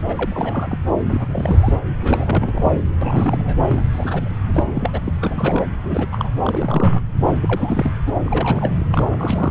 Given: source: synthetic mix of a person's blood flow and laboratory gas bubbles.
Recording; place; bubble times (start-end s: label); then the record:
Doppler ultrasound of blood flow; subclavian vein
0.00-0.02 s: bubbles
0.08-0.78 s: bubbles
1.05-1.80 s: bubbles
2.00-2.83 s: bubbles
3.01-3.62 s: bubbles
3.67-3.84 s: bubbles
3.92-4.30 s: bubbles
4.46-4.63 s: bubbles
4.66-4.90 s: bubbles
4.93-5.00 s: bubbles
5.04-5.12 s: bubbles
5.20-5.66 s: bubbles
5.83-6.08 s: bubbles
6.11-6.29 s: bubbles
6.42-7.00 s: bubbles
7.22-7.33 s: bubbles
7.40-7.91 s: bubbles
8.06-8.12 s: bubbles
8.24-8.84 s: bubbles
8.92-9.51 s: bubbles
From the record:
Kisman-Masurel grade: 342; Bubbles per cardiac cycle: rolling drumbeat, 9 or more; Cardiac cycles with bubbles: 100%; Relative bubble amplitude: moderate (0.250 to 0.450); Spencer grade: 3 (all of the cardiac periods contain showers or single bubble signals, but not dominating or overriding the cardiac motion signals); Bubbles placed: anywhere in the cardiac cycle